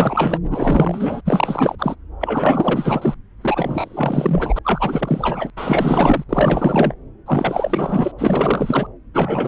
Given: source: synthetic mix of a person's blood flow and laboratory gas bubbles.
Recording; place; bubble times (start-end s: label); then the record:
Doppler ultrasound of blood flow; subclavian vein
0.00-0.39 s: bubbles
0.51-1.21 s: bubbles
1.25-1.75 s: bubbles
1.78-1.95 s: bubbles
2.21-3.15 s: bubbles
3.41-4.59 s: bubbles
4.64-5.50 s: bubbles
5.57-6.24 s: bubbles
6.29-6.94 s: bubbles
7.26-8.12 s: bubbles
8.18-8.87 s: bubbles
9.13-9.48 s: bubbles
From the record:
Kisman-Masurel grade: 444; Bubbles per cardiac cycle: continuous sound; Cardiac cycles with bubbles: 100%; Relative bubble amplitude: maximal (0.775 to 0.999); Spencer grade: 4 (maximum detectable bubble signal sounding continuously throughout systole and diastole of every cardiac period, and overriding the amplitude of the normal cardiac signals); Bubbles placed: anywhere in the cardiac cycle